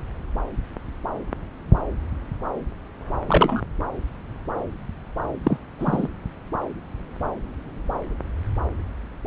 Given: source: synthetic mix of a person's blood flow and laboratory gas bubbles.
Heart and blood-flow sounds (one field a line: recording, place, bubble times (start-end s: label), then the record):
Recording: Doppler ultrasound of blood flow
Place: subclavian vein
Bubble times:
3.28-3.61 s: bubbles
5.43-5.57 s: bubbles
5.79-6.08 s: bubbles
From the record:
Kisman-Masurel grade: 123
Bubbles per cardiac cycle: 1 to 2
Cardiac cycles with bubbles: 10 to 50%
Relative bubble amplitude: loud (0.450 to 0.775)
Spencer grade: 2 (many but less than half of the cardiac periods contain bubble signals, singularly or in groups)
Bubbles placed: anywhere in the cardiac cycle